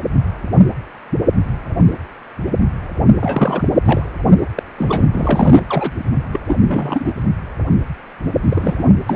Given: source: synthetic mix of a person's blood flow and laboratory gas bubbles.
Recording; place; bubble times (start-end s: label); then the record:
Doppler ultrasound of blood flow; precordium
3.19-3.68 s: bubbles
3.83-4.11 s: bubbles
4.55-4.63 s: bubbles
4.77-5.05 s: bubbles
5.11-5.60 s: bubbles
5.69-5.91 s: bubbles
6.33-6.39 s: bubbles
6.47-6.56 s: bubbles
6.68-7.12 s: bubbles
8.49-8.85 s: bubbles
9.06-9.15 s: bubbles
From the record:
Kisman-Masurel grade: 222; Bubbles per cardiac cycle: several, 3 to 8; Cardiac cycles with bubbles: 10 to 50%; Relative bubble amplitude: moderate (0.250 to 0.450); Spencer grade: 2 (many but less than half of the cardiac periods contain bubble signals, singularly or in groups); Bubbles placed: anywhere in the cardiac cycle